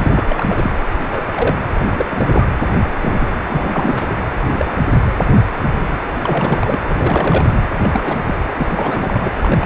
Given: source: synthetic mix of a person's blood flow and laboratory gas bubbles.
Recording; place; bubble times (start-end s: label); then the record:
Doppler ultrasound of blood flow; precordium
0.00-0.12 s: bubbles
0.14-0.25 s: bubbles
0.28-0.72 s: bubbles
1.12-1.21 s: bubbles
1.32-1.56 s: bubbles
1.80-2.46 s: bubbles
3.02-3.27 s: bubbles
3.45-4.16 s: bubbles
4.52-4.71 s: bubbles
6.21-6.78 s: bubbles
6.88-7.56 s: bubbles
7.83-8.01 s: bubbles
8.04-8.16 s: bubbles
8.27-8.35 s: bubbles
8.57-9.30 s: bubbles
9.41-9.66 s: bubbles
From the record:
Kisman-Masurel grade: 232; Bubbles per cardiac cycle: several, 3 to 8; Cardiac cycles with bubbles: 50 to 99%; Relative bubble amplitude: moderate (0.250 to 0.450); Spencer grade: 3 (all of the cardiac periods contain showers or single bubble signals, but not dominating or overriding the cardiac motion signals); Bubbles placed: anywhere in the cardiac cycle